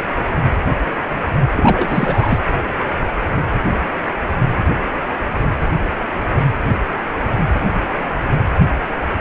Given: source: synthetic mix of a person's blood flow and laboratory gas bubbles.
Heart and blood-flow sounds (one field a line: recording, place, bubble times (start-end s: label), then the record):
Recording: Doppler ultrasound of blood flow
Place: precordium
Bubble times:
1.56-2.39 s: bubbles
From the record:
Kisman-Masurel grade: 213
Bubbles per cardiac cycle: several, 3 to 8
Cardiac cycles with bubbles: 1 to 10%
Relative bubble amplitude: loud (0.450 to 0.775)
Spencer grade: 1 (occasional bubble signal discernible with the cardiac motion signal, with majority of cardiac periods free of bubbles)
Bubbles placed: anywhere in the cardiac cycle